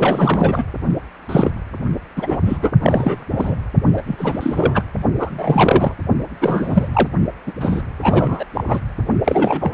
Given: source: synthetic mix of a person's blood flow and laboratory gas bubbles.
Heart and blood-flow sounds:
Doppler ultrasound of blood flow; precordium
0.00-0.64 s: bubbles
1.28-1.51 s: bubbles
2.16-2.39 s: bubbles
2.46-2.58 s: bubbles
2.62-2.71 s: bubbles
2.82-3.25 s: bubbles
3.31-3.56 s: bubbles
3.97-4.02 s: bubbles
4.07-4.84 s: bubbles
5.19-5.94 s: bubbles
6.41-6.88 s: bubbles
6.93-7.08 s: bubbles
7.46-7.52 s: bubbles
7.60-7.81 s: bubbles
8.02-8.45 s: bubbles
8.54-8.80 s: bubbles
9.24-9.74 s: bubbles
From the record:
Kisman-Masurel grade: 343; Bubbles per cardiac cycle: rolling drumbeat, 9 or more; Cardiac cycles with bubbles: 100%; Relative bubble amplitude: loud (0.450 to 0.775); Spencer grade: 3 (all of the cardiac periods contain showers or single bubble signals, but not dominating or overriding the cardiac motion signals); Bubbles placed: only in the low amplitude regions of the cardiac cycle

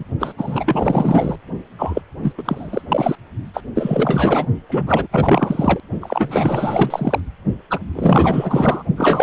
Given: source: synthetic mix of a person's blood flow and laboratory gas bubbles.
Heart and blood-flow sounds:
Doppler ultrasound of blood flow; precordium
0.00-0.04 s: bubbles
0.20-0.33 s: bubbles
0.37-1.36 s: bubbles
1.78-2.01 s: bubbles
2.22-2.33 s: bubbles
2.38-2.82 s: bubbles
2.88-3.16 s: bubbles
3.54-3.61 s: bubbles
3.75-4.46 s: bubbles
4.69-5.07 s: bubbles
5.11-5.80 s: bubbles
6.00-7.21 s: bubbles
7.70-7.79 s: bubbles
7.95-8.83 s: bubbles
8.96-9.23 s: bubbles
From the record:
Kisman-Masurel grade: 444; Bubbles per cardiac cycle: continuous sound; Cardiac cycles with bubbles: 100%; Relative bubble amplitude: maximal (0.775 to 0.999); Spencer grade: 4 (maximum detectable bubble signal sounding continuously throughout systole and diastole of every cardiac period, and overriding the amplitude of the normal cardiac signals); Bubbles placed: only in the low amplitude regions of the cardiac cycle

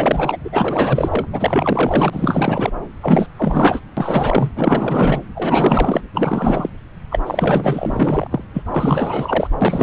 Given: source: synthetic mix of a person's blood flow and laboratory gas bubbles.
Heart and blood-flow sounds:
Doppler ultrasound of blood flow; subclavian vein
0.00-0.38 s: bubbles
0.44-1.27 s: bubbles
1.32-2.71 s: bubbles
3.01-3.27 s: bubbles
3.37-3.80 s: bubbles
3.97-4.52 s: bubbles
4.55-5.21 s: bubbles
5.35-6.01 s: bubbles
6.14-6.69 s: bubbles
7.11-8.28 s: bubbles
8.30-8.44 s: bubbles
8.53-8.62 s: bubbles
8.66-9.50 s: bubbles
9.61-9.83 s: bubbles
From the record:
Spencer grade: 4 (maximum detectable bubble signal sounding continuously throughout systole and diastole of every cardiac period, and overriding the amplitude of the normal cardiac signals); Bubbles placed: anywhere in the cardiac cycle

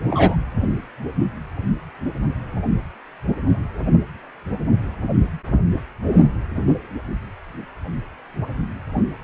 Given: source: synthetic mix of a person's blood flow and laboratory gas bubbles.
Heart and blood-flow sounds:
Doppler ultrasound of blood flow; precordium
0.10-0.36 s: bubbles
From the record:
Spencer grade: 1 (occasional bubble signal discernible with the cardiac motion signal, with majority of cardiac periods free of bubbles); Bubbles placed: anywhere in the cardiac cycle

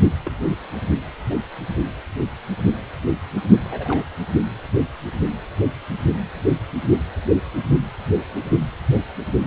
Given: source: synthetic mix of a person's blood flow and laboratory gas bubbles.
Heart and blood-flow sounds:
Doppler ultrasound of blood flow; precordium
0.25-0.31 s: bubbles
1.30-1.34 s: bubbles
3.70-4.03 s: bubbles
From the record:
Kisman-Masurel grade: 121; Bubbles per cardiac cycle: 1 to 2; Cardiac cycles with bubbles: 10 to 50%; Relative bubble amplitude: barely perceptible (0.100 to 0.250); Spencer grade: 2 (many but less than half of the cardiac periods contain bubble signals, singularly or in groups); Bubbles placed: only in the low amplitude regions of the cardiac cycle

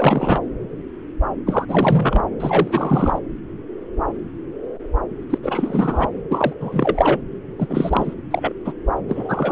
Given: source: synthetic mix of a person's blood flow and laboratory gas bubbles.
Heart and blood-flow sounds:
Doppler ultrasound of blood flow; subclavian vein
0.00-0.40 s: bubbles
1.47-1.65 s: bubbles
1.68-2.23 s: bubbles
2.40-3.19 s: bubbles
5.29-5.38 s: bubbles
5.43-6.08 s: bubbles
6.30-6.53 s: bubbles
6.60-7.21 s: bubbles
7.58-8.14 s: bubbles
8.30-8.53 s: bubbles
8.65-8.73 s: bubbles
9.08-9.52 s: bubbles
From the record:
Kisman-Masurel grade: 333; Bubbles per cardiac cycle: rolling drumbeat, 9 or more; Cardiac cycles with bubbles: 50 to 99%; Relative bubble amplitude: loud (0.450 to 0.775); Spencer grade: 3 (all of the cardiac periods contain showers or single bubble signals, but not dominating or overriding the cardiac motion signals); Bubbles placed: anywhere in the cardiac cycle

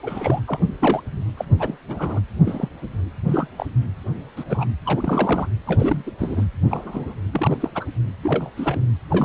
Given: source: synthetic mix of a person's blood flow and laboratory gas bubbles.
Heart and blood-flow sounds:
Doppler ultrasound of blood flow; precordium
0.03-0.41 s: bubbles
0.47-0.58 s: bubbles
0.80-1.02 s: bubbles
1.37-1.45 s: bubbles
1.59-1.77 s: bubbles
1.88-2.20 s: bubbles
2.46-2.69 s: bubbles
3.29-3.47 s: bubbles
3.58-3.66 s: bubbles
4.37-4.44 s: bubbles
4.49-4.65 s: bubbles
4.86-5.48 s: bubbles
5.66-6.11 s: bubbles
6.19-6.46 s: bubbles
6.70-7.13 s: bubbles
7.32-7.57 s: bubbles
7.60-7.70 s: bubbles
7.75-7.86 s: bubbles
8.23-8.49 s: bubbles
8.56-8.80 s: bubbles
9.10-9.25 s: bubbles
From the record:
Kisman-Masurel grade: 242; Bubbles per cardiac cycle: several, 3 to 8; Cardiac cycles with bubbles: 100%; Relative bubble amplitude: moderate (0.250 to 0.450); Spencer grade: 3 (all of the cardiac periods contain showers or single bubble signals, but not dominating or overriding the cardiac motion signals); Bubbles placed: anywhere in the cardiac cycle

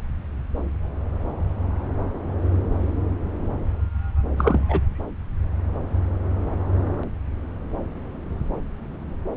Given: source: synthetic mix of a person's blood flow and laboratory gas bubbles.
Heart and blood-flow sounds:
Doppler ultrasound of blood flow; subclavian vein
4.38-4.66 s: bubbles
4.69-4.80 s: bubbles
From the record:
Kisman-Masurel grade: 212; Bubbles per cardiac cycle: several, 3 to 8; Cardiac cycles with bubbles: 1 to 10%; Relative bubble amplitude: moderate (0.250 to 0.450); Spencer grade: 1 (occasional bubble signal discernible with the cardiac motion signal, with majority of cardiac periods free of bubbles); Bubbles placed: anywhere in the cardiac cycle

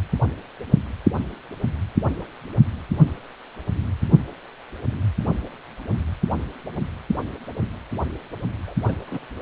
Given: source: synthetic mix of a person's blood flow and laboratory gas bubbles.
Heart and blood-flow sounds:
Doppler ultrasound of blood flow; precordium
8.67-8.74 s: bubbles
8.88-8.96 s: bubbles
9.07-9.21 s: bubbles
From the record:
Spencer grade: 1 (occasional bubble signal discernible with the cardiac motion signal, with majority of cardiac periods free of bubbles); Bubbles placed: only in the low amplitude regions of the cardiac cycle

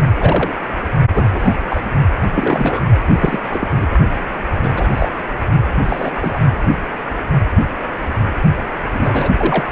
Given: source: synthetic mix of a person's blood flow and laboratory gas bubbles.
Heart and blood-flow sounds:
Doppler ultrasound of blood flow; precordium
0.16-0.54 s: bubbles
1.15-1.56 s: bubbles
1.70-1.81 s: bubbles
2.35-2.81 s: bubbles
3.06-3.40 s: bubbles
3.52-3.68 s: bubbles
3.72-3.86 s: bubbles
4.62-4.88 s: bubbles
4.95-5.08 s: bubbles
5.84-6.11 s: bubbles
6.15-6.39 s: bubbles
8.93-9.29 s: bubbles
9.37-9.72 s: bubbles
From the record:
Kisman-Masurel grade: 232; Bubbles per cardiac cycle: several, 3 to 8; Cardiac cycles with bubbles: 50 to 99%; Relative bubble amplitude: moderate (0.250 to 0.450); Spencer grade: 3 (all of the cardiac periods contain showers or single bubble signals, but not dominating or overriding the cardiac motion signals); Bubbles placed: only in the low amplitude regions of the cardiac cycle

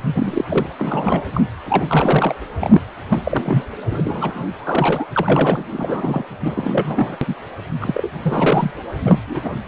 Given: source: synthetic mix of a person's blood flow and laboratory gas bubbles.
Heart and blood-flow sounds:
Doppler ultrasound of blood flow; precordium
0.14-0.43 s: bubbles
0.49-0.67 s: bubbles
0.78-1.24 s: bubbles
1.33-1.41 s: bubbles
1.66-2.35 s: bubbles
2.59-2.81 s: bubbles
3.10-3.20 s: bubbles
3.23-3.64 s: bubbles
3.90-4.46 s: bubbles
4.58-5.07 s: bubbles
5.16-5.64 s: bubbles
5.71-6.23 s: bubbles
6.40-7.17 s: bubbles
7.21-7.34 s: bubbles
7.80-8.09 s: bubbles
8.22-8.72 s: bubbles
9.02-9.20 s: bubbles
9.27-9.49 s: bubbles
From the record:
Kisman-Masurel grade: 242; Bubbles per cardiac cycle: several, 3 to 8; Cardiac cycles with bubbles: 100%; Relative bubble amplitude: moderate (0.250 to 0.450); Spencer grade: 3 (all of the cardiac periods contain showers or single bubble signals, but not dominating or overriding the cardiac motion signals); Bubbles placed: anywhere in the cardiac cycle

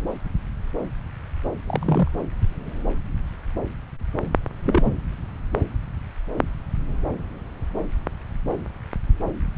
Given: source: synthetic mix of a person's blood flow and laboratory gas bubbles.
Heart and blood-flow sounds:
Doppler ultrasound of blood flow; subclavian vein
1.67-2.08 s: bubbles
4.64-4.92 s: bubbles
From the record:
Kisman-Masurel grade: 122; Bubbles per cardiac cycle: 1 to 2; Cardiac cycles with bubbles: 10 to 50%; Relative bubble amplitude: moderate (0.250 to 0.450); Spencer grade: 2 (many but less than half of the cardiac periods contain bubble signals, singularly or in groups); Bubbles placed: anywhere in the cardiac cycle

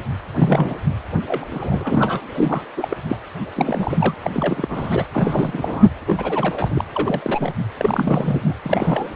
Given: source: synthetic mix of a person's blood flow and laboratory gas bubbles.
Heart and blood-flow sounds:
Doppler ultrasound of blood flow; precordium
0.35-0.74 s: bubbles
1.27-1.45 s: bubbles
1.50-2.20 s: bubbles
2.35-2.62 s: bubbles
2.77-2.88 s: bubbles
2.90-2.97 s: bubbles
3.08-3.17 s: bubbles
3.40-3.50 s: bubbles
3.55-4.14 s: bubbles
4.24-5.06 s: bubbles
5.13-5.86 s: bubbles
6.06-6.84 s: bubbles
6.92-7.53 s: bubbles
7.79-8.54 s: bubbles
8.65-9.10 s: bubbles
From the record:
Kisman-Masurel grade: 342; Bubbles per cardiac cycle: rolling drumbeat, 9 or more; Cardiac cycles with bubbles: 100%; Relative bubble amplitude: moderate (0.250 to 0.450); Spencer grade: 3 (all of the cardiac periods contain showers or single bubble signals, but not dominating or overriding the cardiac motion signals); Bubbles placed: anywhere in the cardiac cycle

